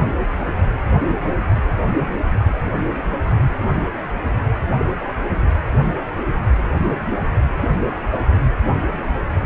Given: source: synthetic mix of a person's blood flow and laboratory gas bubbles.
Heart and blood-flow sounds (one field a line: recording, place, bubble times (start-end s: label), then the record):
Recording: Doppler ultrasound of blood flow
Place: precordium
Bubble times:
3.58-3.83 s: bubbles
From the record:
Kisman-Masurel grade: 111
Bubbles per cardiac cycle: 1 to 2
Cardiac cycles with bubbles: 1 to 10%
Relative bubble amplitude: barely perceptible (0.100 to 0.250)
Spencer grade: 1 (occasional bubble signal discernible with the cardiac motion signal, with majority of cardiac periods free of bubbles)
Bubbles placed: anywhere in the cardiac cycle